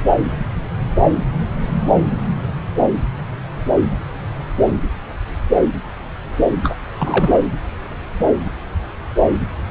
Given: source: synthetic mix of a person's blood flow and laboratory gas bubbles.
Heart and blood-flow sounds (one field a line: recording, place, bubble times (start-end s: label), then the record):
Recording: Doppler ultrasound of blood flow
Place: subclavian vein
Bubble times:
6.63-6.71 s: bubbles
6.98-7.48 s: bubbles
From the record:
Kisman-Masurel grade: 213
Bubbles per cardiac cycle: several, 3 to 8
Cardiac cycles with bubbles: 1 to 10%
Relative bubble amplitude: loud (0.450 to 0.775)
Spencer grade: 1 (occasional bubble signal discernible with the cardiac motion signal, with majority of cardiac periods free of bubbles)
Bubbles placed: anywhere in the cardiac cycle